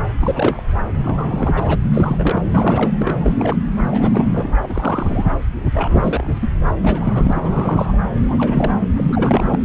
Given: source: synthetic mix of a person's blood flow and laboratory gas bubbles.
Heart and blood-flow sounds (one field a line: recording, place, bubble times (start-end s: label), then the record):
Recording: Doppler ultrasound of blood flow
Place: subclavian vein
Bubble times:
0.20-0.62 s: bubbles
0.96-1.76 s: bubbles
1.82-2.41 s: bubbles
2.50-3.15 s: bubbles
3.18-3.57 s: bubbles
3.91-4.57 s: bubbles
4.62-5.26 s: bubbles
5.74-6.49 s: bubbles
6.81-7.98 s: bubbles
8.15-8.71 s: bubbles
8.97-9.60 s: bubbles
From the record:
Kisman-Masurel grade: 332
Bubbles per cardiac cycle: rolling drumbeat, 9 or more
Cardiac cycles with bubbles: 50 to 99%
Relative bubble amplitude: moderate (0.250 to 0.450)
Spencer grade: 3 (all of the cardiac periods contain showers or single bubble signals, but not dominating or overriding the cardiac motion signals)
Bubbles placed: anywhere in the cardiac cycle